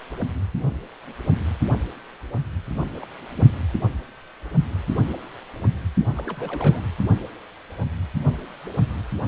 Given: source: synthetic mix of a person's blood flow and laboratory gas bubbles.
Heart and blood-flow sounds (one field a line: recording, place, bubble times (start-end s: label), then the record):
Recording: Doppler ultrasound of blood flow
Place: precordium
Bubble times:
2.70-2.85 s: bubbles
3.02-3.05 s: bubbles
3.35-3.43 s: bubbles
5.96-6.06 s: bubbles
6.15-6.83 s: bubbles
9.25-9.28 s: bubbles
From the record:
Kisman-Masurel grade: 221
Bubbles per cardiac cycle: several, 3 to 8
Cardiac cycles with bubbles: 10 to 50%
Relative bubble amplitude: barely perceptible (0.100 to 0.250)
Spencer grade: 2 (many but less than half of the cardiac periods contain bubble signals, singularly or in groups)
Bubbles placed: anywhere in the cardiac cycle